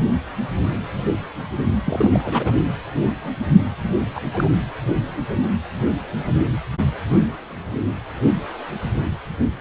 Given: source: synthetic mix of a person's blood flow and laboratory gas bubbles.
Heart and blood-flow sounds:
Doppler ultrasound of blood flow; precordium
1.84-2.53 s: bubbles
4.15-4.20 s: bubbles
4.33-4.48 s: bubbles
From the record:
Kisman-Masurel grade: 222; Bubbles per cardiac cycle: several, 3 to 8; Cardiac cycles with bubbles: 10 to 50%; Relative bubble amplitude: moderate (0.250 to 0.450); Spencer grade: 2 (many but less than half of the cardiac periods contain bubble signals, singularly or in groups); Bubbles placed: anywhere in the cardiac cycle

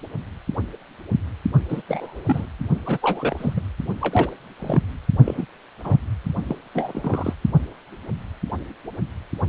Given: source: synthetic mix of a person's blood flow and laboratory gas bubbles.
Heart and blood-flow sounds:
Doppler ultrasound of blood flow; precordium
1.69-1.82 s: bubbles
1.87-2.23 s: bubbles
2.25-2.46 s: bubbles
2.85-2.98 s: bubbles
3.02-3.63 s: bubbles
4.01-4.29 s: bubbles
4.59-4.82 s: bubbles
5.25-5.45 s: bubbles
5.84-5.96 s: bubbles
6.47-6.56 s: bubbles
6.74-7.33 s: bubbles
From the record:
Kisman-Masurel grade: 222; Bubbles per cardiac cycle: several, 3 to 8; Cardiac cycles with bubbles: 10 to 50%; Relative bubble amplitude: moderate (0.250 to 0.450); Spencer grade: 2 (many but less than half of the cardiac periods contain bubble signals, singularly or in groups); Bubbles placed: only in the low amplitude regions of the cardiac cycle

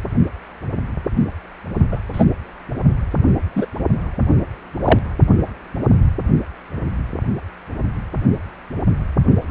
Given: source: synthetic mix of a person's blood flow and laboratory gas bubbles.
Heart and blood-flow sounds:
Doppler ultrasound of blood flow; precordium
1.91-2.00 s: bubbles
2.12-2.25 s: bubbles
3.55-3.66 s: bubbles
4.85-5.00 s: bubbles
From the record:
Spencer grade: 2 (many but less than half of the cardiac periods contain bubble signals, singularly or in groups); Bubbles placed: only in the low amplitude regions of the cardiac cycle

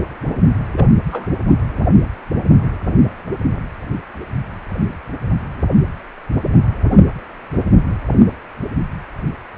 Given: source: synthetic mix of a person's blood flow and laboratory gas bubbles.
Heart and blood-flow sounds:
Doppler ultrasound of blood flow; precordium
0.69-0.83 s: bubbles
1.10-1.32 s: bubbles
From the record:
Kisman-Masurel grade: 122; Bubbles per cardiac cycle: 1 to 2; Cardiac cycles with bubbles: 10 to 50%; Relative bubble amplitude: moderate (0.250 to 0.450); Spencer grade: 2 (many but less than half of the cardiac periods contain bubble signals, singularly or in groups); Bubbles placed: anywhere in the cardiac cycle

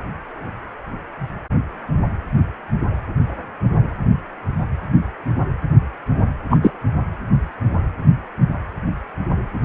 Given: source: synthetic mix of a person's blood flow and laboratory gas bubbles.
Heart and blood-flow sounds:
Doppler ultrasound of blood flow; precordium
6.50-6.58 s: bubbles
6.62-6.71 s: bubbles
From the record:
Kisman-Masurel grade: 113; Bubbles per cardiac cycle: 1 to 2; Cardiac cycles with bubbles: 1 to 10%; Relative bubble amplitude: loud (0.450 to 0.775); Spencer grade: 1 (occasional bubble signal discernible with the cardiac motion signal, with majority of cardiac periods free of bubbles); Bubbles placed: anywhere in the cardiac cycle

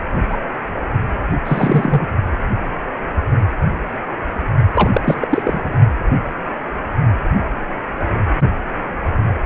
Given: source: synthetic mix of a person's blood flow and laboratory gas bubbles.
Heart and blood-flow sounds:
Doppler ultrasound of blood flow; precordium
0.29-0.38 s: bubbles
1.45-2.08 s: bubbles
4.74-5.01 s: bubbles
5.04-5.77 s: bubbles
From the record:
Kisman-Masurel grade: 223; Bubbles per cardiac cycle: several, 3 to 8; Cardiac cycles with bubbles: 10 to 50%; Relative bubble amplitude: loud (0.450 to 0.775); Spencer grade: 2 (many but less than half of the cardiac periods contain bubble signals, singularly or in groups); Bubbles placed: only in the low amplitude regions of the cardiac cycle

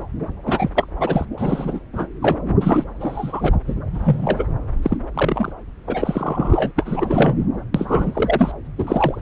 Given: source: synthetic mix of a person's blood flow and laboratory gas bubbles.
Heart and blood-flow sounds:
Doppler ultrasound of blood flow; subclavian vein
0.45-0.70 s: bubbles
0.75-0.86 s: bubbles
1.00-1.25 s: bubbles
1.38-1.80 s: bubbles
1.93-2.08 s: bubbles
2.22-2.37 s: bubbles
2.60-2.84 s: bubbles
3.00-3.57 s: bubbles
3.66-3.75 s: bubbles
3.93-4.47 s: bubbles
4.82-4.98 s: bubbles
5.14-5.52 s: bubbles
5.87-6.72 s: bubbles
6.76-7.46 s: bubbles
7.74-8.51 s: bubbles
8.78-9.22 s: bubbles
From the record:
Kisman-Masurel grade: 233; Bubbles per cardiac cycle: several, 3 to 8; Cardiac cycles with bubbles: 50 to 99%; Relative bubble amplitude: loud (0.450 to 0.775); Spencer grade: 3 (all of the cardiac periods contain showers or single bubble signals, but not dominating or overriding the cardiac motion signals); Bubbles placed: anywhere in the cardiac cycle

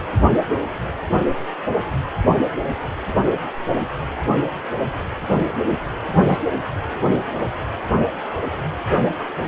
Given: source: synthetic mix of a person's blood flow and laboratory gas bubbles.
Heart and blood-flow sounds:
Doppler ultrasound of blood flow; precordium
6.27-6.39 s: bubbles
From the record:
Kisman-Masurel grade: 113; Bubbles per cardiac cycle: 1 to 2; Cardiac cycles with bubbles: 1 to 10%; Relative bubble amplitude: loud (0.450 to 0.775); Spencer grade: 1 (occasional bubble signal discernible with the cardiac motion signal, with majority of cardiac periods free of bubbles); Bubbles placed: only in the low amplitude regions of the cardiac cycle

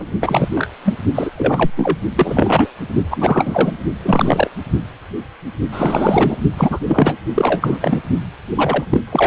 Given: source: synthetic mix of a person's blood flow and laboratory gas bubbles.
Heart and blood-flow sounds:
Doppler ultrasound of blood flow; precordium
0.00-0.07 s: bubbles
0.21-0.48 s: bubbles
0.55-0.68 s: bubbles
0.84-0.96 s: bubbles
1.15-1.31 s: bubbles
1.37-1.71 s: bubbles
1.77-1.98 s: bubbles
2.16-2.69 s: bubbles
3.10-3.71 s: bubbles
4.04-4.49 s: bubbles
5.71-6.37 s: bubbles
6.57-6.79 s: bubbles
6.85-7.13 s: bubbles
7.34-8.01 s: bubbles
8.55-8.85 s: bubbles
8.90-9.01 s: bubbles
9.12-9.27 s: bubbles
From the record:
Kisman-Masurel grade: 333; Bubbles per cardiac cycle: rolling drumbeat, 9 or more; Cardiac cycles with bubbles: 50 to 99%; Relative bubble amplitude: loud (0.450 to 0.775); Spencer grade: 3 (all of the cardiac periods contain showers or single bubble signals, but not dominating or overriding the cardiac motion signals); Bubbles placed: only in the low amplitude regions of the cardiac cycle

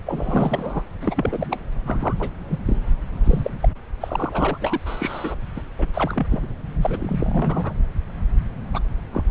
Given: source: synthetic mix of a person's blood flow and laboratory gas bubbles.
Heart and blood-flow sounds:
Doppler ultrasound of blood flow; subclavian vein
0.05-0.82 s: bubbles
1.01-1.58 s: bubbles
1.85-2.14 s: bubbles
2.19-2.31 s: bubbles
2.50-2.58 s: bubbles
2.65-2.77 s: bubbles
3.24-3.51 s: bubbles
3.62-3.69 s: bubbles
4.01-4.58 s: bubbles
4.61-4.80 s: bubbles
4.86-5.38 s: bubbles
5.56-5.61 s: bubbles
5.79-5.87 s: bubbles
5.94-6.26 s: bubbles
6.31-6.46 s: bubbles
6.81-7.73 s: bubbles
8.72-8.79 s: bubbles
9.12-9.24 s: bubbles
From the record:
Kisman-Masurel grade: 242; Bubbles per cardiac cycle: several, 3 to 8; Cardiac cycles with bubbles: 100%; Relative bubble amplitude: moderate (0.250 to 0.450); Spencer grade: 3 (all of the cardiac periods contain showers or single bubble signals, but not dominating or overriding the cardiac motion signals); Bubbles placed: anywhere in the cardiac cycle

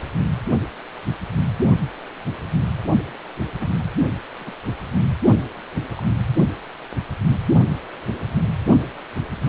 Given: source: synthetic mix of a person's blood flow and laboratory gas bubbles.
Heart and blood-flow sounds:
Doppler ultrasound of blood flow; precordium
3.59-3.84 s: bubbles
4.39-4.53 s: bubbles
5.97-6.03 s: bubbles
9.41-9.48 s: bubbles
From the record:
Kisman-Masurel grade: 121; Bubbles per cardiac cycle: 1 to 2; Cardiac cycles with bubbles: 10 to 50%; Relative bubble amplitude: barely perceptible (0.100 to 0.250); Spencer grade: 2 (many but less than half of the cardiac periods contain bubble signals, singularly or in groups); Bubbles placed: only in the low amplitude regions of the cardiac cycle

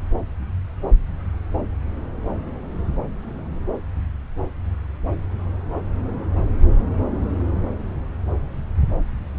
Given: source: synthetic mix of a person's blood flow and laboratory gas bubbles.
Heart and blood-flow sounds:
Doppler ultrasound of blood flow; subclavian vein
no bubbles
From the record:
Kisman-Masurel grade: 000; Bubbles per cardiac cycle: 0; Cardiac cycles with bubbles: 0%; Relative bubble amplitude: no bubbles discernible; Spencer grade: 0 (complete lack of bubble signals)

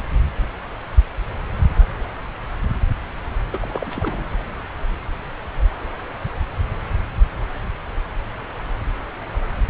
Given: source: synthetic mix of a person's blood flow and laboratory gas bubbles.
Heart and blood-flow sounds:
Doppler ultrasound of blood flow; subclavian vein
3.52-4.24 s: bubbles
From the record:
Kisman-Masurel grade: 211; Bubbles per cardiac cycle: several, 3 to 8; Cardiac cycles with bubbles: 1 to 10%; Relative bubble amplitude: barely perceptible (0.100 to 0.250); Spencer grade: 1 (occasional bubble signal discernible with the cardiac motion signal, with majority of cardiac periods free of bubbles); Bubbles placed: anywhere in the cardiac cycle

